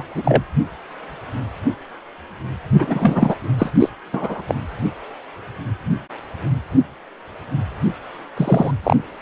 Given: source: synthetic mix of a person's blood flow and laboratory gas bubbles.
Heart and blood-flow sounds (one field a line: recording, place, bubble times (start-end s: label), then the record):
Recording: Doppler ultrasound of blood flow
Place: precordium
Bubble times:
0.00-0.05 s: bubbles
0.15-0.44 s: bubbles
2.72-3.35 s: bubbles
3.58-3.70 s: bubbles
3.79-3.90 s: bubbles
4.12-4.43 s: bubbles
4.48-4.54 s: bubbles
8.37-8.71 s: bubbles
8.83-8.96 s: bubbles
From the record:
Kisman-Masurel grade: 223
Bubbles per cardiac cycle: several, 3 to 8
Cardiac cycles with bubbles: 10 to 50%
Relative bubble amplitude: loud (0.450 to 0.775)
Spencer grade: 2 (many but less than half of the cardiac periods contain bubble signals, singularly or in groups)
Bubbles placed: anywhere in the cardiac cycle